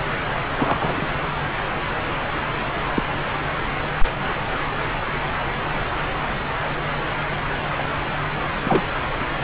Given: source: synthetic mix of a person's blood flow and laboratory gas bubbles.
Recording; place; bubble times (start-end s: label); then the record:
Doppler ultrasound of blood flow; subclavian vein
0.55-1.07 s: bubbles
2.95-3.02 s: bubbles
7.78-7.84 s: bubbles
8.63-8.84 s: bubbles
From the record:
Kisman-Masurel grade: 122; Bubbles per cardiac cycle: 1 to 2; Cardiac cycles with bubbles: 10 to 50%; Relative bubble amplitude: moderate (0.250 to 0.450); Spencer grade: 2 (many but less than half of the cardiac periods contain bubble signals, singularly or in groups); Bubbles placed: anywhere in the cardiac cycle